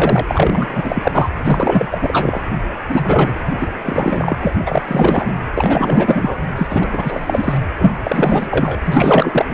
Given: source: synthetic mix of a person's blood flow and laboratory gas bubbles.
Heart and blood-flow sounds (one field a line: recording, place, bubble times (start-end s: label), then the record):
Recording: Doppler ultrasound of blood flow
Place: precordium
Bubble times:
0.00-0.24 s: bubbles
0.28-1.30 s: bubbles
1.44-2.41 s: bubbles
2.89-3.33 s: bubbles
3.60-3.67 s: bubbles
3.85-4.35 s: bubbles
4.41-4.55 s: bubbles
4.66-4.83 s: bubbles
4.88-5.34 s: bubbles
5.55-6.45 s: bubbles
6.56-6.88 s: bubbles
6.92-7.58 s: bubbles
7.78-7.97 s: bubbles
8.04-8.47 s: bubbles
8.51-8.79 s: bubbles
8.86-9.46 s: bubbles
9.48-9.54 s: bubbles
From the record:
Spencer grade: 4 (maximum detectable bubble signal sounding continuously throughout systole and diastole of every cardiac period, and overriding the amplitude of the normal cardiac signals)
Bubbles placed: anywhere in the cardiac cycle